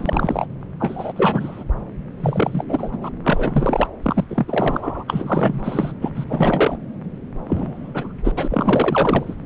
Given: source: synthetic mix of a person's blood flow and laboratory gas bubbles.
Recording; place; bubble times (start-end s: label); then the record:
Doppler ultrasound of blood flow; subclavian vein
0.00-0.45 s: bubbles
0.79-1.12 s: bubbles
1.16-1.64 s: bubbles
2.20-2.64 s: bubbles
2.69-2.98 s: bubbles
3.01-3.10 s: bubbles
3.23-3.88 s: bubbles
4.02-4.24 s: bubbles
4.30-5.04 s: bubbles
5.08-5.92 s: bubbles
6.02-6.10 s: bubbles
6.16-6.25 s: bubbles
6.28-6.78 s: bubbles
7.48-8.12 s: bubbles
8.24-8.32 s: bubbles
8.36-9.35 s: bubbles
From the record:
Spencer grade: 3 (all of the cardiac periods contain showers or single bubble signals, but not dominating or overriding the cardiac motion signals); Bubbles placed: anywhere in the cardiac cycle